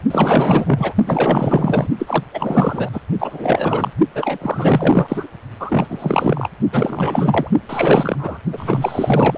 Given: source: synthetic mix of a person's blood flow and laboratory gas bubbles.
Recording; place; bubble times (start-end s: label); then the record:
Doppler ultrasound of blood flow; precordium
0.10-0.93 s: bubbles
1.05-1.87 s: bubbles
1.99-2.24 s: bubbles
2.33-2.89 s: bubbles
2.92-3.01 s: bubbles
3.19-3.91 s: bubbles
4.15-4.38 s: bubbles
4.40-5.27 s: bubbles
5.59-6.48 s: bubbles
6.72-7.50 s: bubbles
7.69-8.38 s: bubbles
8.53-9.38 s: bubbles
From the record:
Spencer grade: 4 (maximum detectable bubble signal sounding continuously throughout systole and diastole of every cardiac period, and overriding the amplitude of the normal cardiac signals); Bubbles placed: only in the low amplitude regions of the cardiac cycle